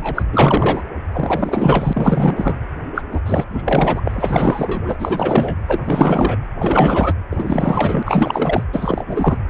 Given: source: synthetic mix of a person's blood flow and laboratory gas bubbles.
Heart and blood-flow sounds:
Doppler ultrasound of blood flow; precordium
0.00-0.22 s: bubbles
0.33-0.83 s: bubbles
1.11-2.55 s: bubbles
2.95-3.03 s: bubbles
3.11-3.21 s: bubbles
3.26-3.48 s: bubbles
3.51-4.01 s: bubbles
4.04-5.57 s: bubbles
5.68-6.37 s: bubbles
6.55-7.14 s: bubbles
7.31-8.03 s: bubbles
8.05-8.63 s: bubbles
8.72-9.04 s: bubbles
9.08-9.37 s: bubbles
From the record:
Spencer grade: 4 (maximum detectable bubble signal sounding continuously throughout systole and diastole of every cardiac period, and overriding the amplitude of the normal cardiac signals); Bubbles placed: anywhere in the cardiac cycle

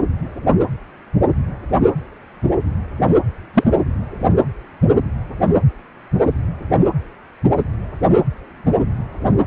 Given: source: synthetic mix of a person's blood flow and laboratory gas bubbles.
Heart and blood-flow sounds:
Doppler ultrasound of blood flow; precordium
3.54-3.64 s: bubbles
From the record:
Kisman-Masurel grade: 113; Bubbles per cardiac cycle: 1 to 2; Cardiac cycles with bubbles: 1 to 10%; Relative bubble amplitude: loud (0.450 to 0.775); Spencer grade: 1 (occasional bubble signal discernible with the cardiac motion signal, with majority of cardiac periods free of bubbles); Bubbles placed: anywhere in the cardiac cycle

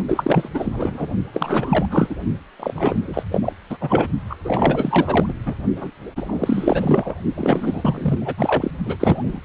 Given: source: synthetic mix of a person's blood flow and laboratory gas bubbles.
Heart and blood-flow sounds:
Doppler ultrasound of blood flow; precordium
0.08-0.51 s: bubbles
0.54-1.08 s: bubbles
1.32-1.86 s: bubbles
1.91-2.15 s: bubbles
2.59-3.23 s: bubbles
3.31-3.53 s: bubbles
3.70-3.77 s: bubbles
3.80-4.08 s: bubbles
4.29-4.37 s: bubbles
4.44-5.34 s: bubbles
5.46-5.55 s: bubbles
5.76-5.91 s: bubbles
6.16-7.15 s: bubbles
7.35-8.19 s: bubbles
8.21-8.34 s: bubbles
8.37-8.72 s: bubbles
8.86-8.96 s: bubbles
8.99-9.40 s: bubbles
From the record:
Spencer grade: 4 (maximum detectable bubble signal sounding continuously throughout systole and diastole of every cardiac period, and overriding the amplitude of the normal cardiac signals); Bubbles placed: only in the low amplitude regions of the cardiac cycle

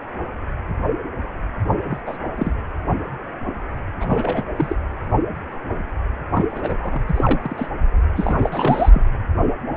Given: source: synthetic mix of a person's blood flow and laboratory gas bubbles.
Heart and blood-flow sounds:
Doppler ultrasound of blood flow; precordium
1.90-2.00 s: bubbles
2.06-2.17 s: bubbles
2.36-2.52 s: bubbles
4.00-4.44 s: bubbles
4.58-4.75 s: bubbles
6.35-7.01 s: bubbles
7.08-7.39 s: bubbles
7.42-7.70 s: bubbles
8.15-9.05 s: bubbles
From the record:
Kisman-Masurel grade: 232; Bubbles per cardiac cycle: several, 3 to 8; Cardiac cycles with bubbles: 50 to 99%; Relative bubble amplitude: moderate (0.250 to 0.450); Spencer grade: 3 (all of the cardiac periods contain showers or single bubble signals, but not dominating or overriding the cardiac motion signals); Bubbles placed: anywhere in the cardiac cycle

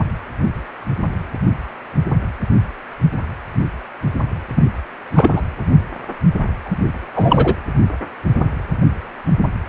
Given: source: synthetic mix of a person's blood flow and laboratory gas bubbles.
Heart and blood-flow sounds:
Doppler ultrasound of blood flow; precordium
4.56-4.65 s: bubbles
5.15-5.41 s: bubbles
6.65-6.77 s: bubbles
7.15-7.56 s: bubbles
From the record:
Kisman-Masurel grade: 223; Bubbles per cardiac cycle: several, 3 to 8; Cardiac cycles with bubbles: 10 to 50%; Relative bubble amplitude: loud (0.450 to 0.775); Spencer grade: 2 (many but less than half of the cardiac periods contain bubble signals, singularly or in groups); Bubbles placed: anywhere in the cardiac cycle

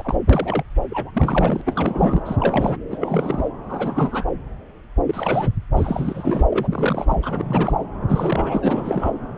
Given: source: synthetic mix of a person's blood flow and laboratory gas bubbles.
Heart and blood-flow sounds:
Doppler ultrasound of blood flow; subclavian vein
0.00-0.15 s: bubbles
0.30-0.63 s: bubbles
0.90-1.62 s: bubbles
1.66-2.22 s: bubbles
2.25-2.36 s: bubbles
2.39-2.76 s: bubbles
2.90-3.48 s: bubbles
3.69-4.26 s: bubbles
5.07-5.51 s: bubbles
5.76-6.44 s: bubbles
6.50-6.68 s: bubbles
6.72-7.07 s: bubbles
7.09-7.16 s: bubbles
7.22-7.82 s: bubbles
8.09-9.12 s: bubbles
From the record:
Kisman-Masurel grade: 332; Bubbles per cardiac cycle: rolling drumbeat, 9 or more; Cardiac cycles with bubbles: 50 to 99%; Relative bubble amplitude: moderate (0.250 to 0.450); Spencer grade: 3 (all of the cardiac periods contain showers or single bubble signals, but not dominating or overriding the cardiac motion signals); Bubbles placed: anywhere in the cardiac cycle

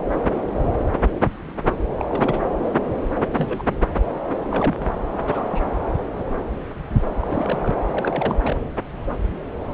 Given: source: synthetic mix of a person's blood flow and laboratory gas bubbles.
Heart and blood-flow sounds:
Doppler ultrasound of blood flow; subclavian vein
1.97-2.42 s: bubbles
3.36-3.63 s: bubbles
3.68-3.74 s: bubbles
4.51-4.75 s: bubbles
4.80-4.84 s: bubbles
5.23-5.68 s: bubbles
7.21-7.73 s: bubbles
7.87-8.36 s: bubbles
8.40-8.57 s: bubbles
From the record:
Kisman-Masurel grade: 221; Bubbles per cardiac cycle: several, 3 to 8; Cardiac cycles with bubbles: 10 to 50%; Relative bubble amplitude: barely perceptible (0.100 to 0.250); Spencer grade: 2 (many but less than half of the cardiac periods contain bubble signals, singularly or in groups); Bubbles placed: anywhere in the cardiac cycle

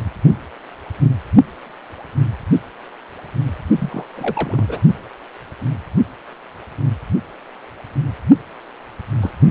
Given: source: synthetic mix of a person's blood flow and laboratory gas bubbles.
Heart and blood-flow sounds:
Doppler ultrasound of blood flow; precordium
3.78-4.05 s: bubbles
4.17-4.81 s: bubbles
9.21-9.34 s: bubbles
From the record:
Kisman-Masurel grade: 221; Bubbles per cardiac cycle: several, 3 to 8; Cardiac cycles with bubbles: 10 to 50%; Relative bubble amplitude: barely perceptible (0.100 to 0.250); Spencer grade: 2 (many but less than half of the cardiac periods contain bubble signals, singularly or in groups); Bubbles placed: only in the low amplitude regions of the cardiac cycle

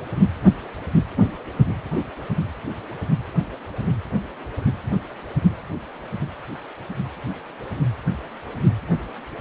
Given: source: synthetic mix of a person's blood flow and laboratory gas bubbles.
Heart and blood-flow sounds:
Doppler ultrasound of blood flow; precordium
no bubbles
From the record:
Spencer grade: 0 (complete lack of bubble signals)

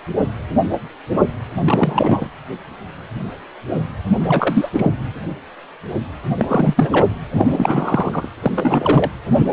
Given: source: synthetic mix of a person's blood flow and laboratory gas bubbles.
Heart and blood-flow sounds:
Doppler ultrasound of blood flow; precordium
1.52-2.29 s: bubbles
4.20-4.69 s: bubbles
4.73-4.90 s: bubbles
6.38-7.07 s: bubbles
7.32-8.29 s: bubbles
8.42-8.51 s: bubbles
8.55-9.11 s: bubbles
9.30-9.46 s: bubbles
From the record:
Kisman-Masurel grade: 333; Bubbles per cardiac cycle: rolling drumbeat, 9 or more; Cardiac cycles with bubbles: 50 to 99%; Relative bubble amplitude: loud (0.450 to 0.775); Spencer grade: 3 (all of the cardiac periods contain showers or single bubble signals, but not dominating or overriding the cardiac motion signals); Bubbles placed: anywhere in the cardiac cycle

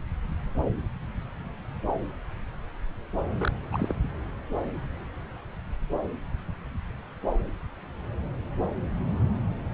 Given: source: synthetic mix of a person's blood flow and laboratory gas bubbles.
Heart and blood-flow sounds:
Doppler ultrasound of blood flow; subclavian vein
3.38-3.52 s: bubbles
3.72-3.93 s: bubbles
From the record:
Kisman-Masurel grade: 211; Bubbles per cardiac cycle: several, 3 to 8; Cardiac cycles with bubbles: 1 to 10%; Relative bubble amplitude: barely perceptible (0.100 to 0.250); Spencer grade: 1 (occasional bubble signal discernible with the cardiac motion signal, with majority of cardiac periods free of bubbles); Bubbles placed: anywhere in the cardiac cycle

